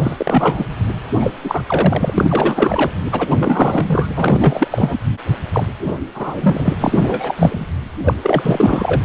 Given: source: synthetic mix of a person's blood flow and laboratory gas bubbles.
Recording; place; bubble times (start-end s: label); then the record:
Doppler ultrasound of blood flow; precordium
0.00-0.66 s: bubbles
1.19-1.33 s: bubbles
1.44-1.63 s: bubbles
1.66-2.14 s: bubbles
2.17-2.91 s: bubbles
3.12-4.08 s: bubbles
4.16-4.68 s: bubbles
4.71-4.96 s: bubbles
5.53-5.66 s: bubbles
5.86-5.94 s: bubbles
6.15-6.71 s: bubbles
6.80-7.00 s: bubbles
7.02-7.67 s: bubbles
8.04-8.14 s: bubbles
8.21-9.03 s: bubbles
From the record:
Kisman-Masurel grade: 343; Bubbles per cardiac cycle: rolling drumbeat, 9 or more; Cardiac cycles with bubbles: 100%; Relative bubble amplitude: loud (0.450 to 0.775); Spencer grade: 3 (all of the cardiac periods contain showers or single bubble signals, but not dominating or overriding the cardiac motion signals); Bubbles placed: anywhere in the cardiac cycle